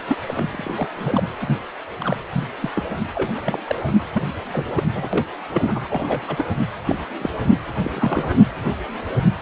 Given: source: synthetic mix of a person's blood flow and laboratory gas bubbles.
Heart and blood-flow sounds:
Doppler ultrasound of blood flow; precordium
0.08-0.17 s: bubbles
0.26-0.88 s: bubbles
0.95-1.20 s: bubbles
1.41-1.56 s: bubbles
2.00-2.17 s: bubbles
2.32-2.44 s: bubbles
2.61-2.71 s: bubbles
2.74-2.83 s: bubbles
3.15-3.58 s: bubbles
3.67-3.76 s: bubbles
3.85-3.92 s: bubbles
4.14-4.23 s: bubbles
4.51-4.66 s: bubbles
4.75-4.83 s: bubbles
4.95-5.09 s: bubbles
5.12-5.26 s: bubbles
5.52-6.45 s: bubbles
6.86-6.99 s: bubbles
7.18-7.30 s: bubbles
7.75-7.91 s: bubbles
7.93-8.46 s: bubbles
From the record:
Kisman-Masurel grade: 242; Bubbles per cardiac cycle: several, 3 to 8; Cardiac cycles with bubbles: 100%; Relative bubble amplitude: moderate (0.250 to 0.450); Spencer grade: 3 (all of the cardiac periods contain showers or single bubble signals, but not dominating or overriding the cardiac motion signals); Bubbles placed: anywhere in the cardiac cycle

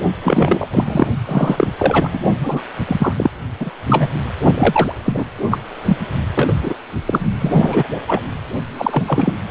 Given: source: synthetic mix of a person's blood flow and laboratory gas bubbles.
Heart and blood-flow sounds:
Doppler ultrasound of blood flow; precordium
0.21-0.67 s: bubbles
0.71-1.07 s: bubbles
1.26-1.68 s: bubbles
1.79-2.09 s: bubbles
2.13-2.19 s: bubbles
2.40-2.62 s: bubbles
2.87-3.12 s: bubbles
3.18-3.30 s: bubbles
3.60-3.71 s: bubbles
3.87-4.11 s: bubbles
4.55-4.92 s: bubbles
5.05-5.25 s: bubbles
5.50-5.59 s: bubbles
5.85-5.96 s: bubbles
6.35-6.53 s: bubbles
6.62-6.74 s: bubbles
7.05-7.19 s: bubbles
7.41-7.88 s: bubbles
8.07-8.22 s: bubbles
8.77-9.03 s: bubbles
9.06-9.32 s: bubbles
From the record:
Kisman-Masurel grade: 243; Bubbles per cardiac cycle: several, 3 to 8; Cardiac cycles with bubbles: 100%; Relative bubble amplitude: loud (0.450 to 0.775); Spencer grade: 3 (all of the cardiac periods contain showers or single bubble signals, but not dominating or overriding the cardiac motion signals); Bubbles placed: only in the low amplitude regions of the cardiac cycle

